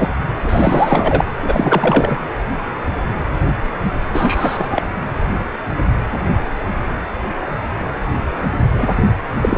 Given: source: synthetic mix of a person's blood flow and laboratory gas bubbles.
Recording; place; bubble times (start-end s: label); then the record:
Doppler ultrasound of blood flow; precordium
0.00-0.10 s: bubbles
0.45-1.24 s: bubbles
1.43-2.18 s: bubbles
4.12-4.83 s: bubbles
8.74-8.91 s: bubbles
9.41-9.58 s: bubbles
From the record:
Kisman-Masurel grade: 233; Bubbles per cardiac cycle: several, 3 to 8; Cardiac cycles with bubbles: 50 to 99%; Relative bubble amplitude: loud (0.450 to 0.775); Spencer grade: 3 (all of the cardiac periods contain showers or single bubble signals, but not dominating or overriding the cardiac motion signals); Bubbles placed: anywhere in the cardiac cycle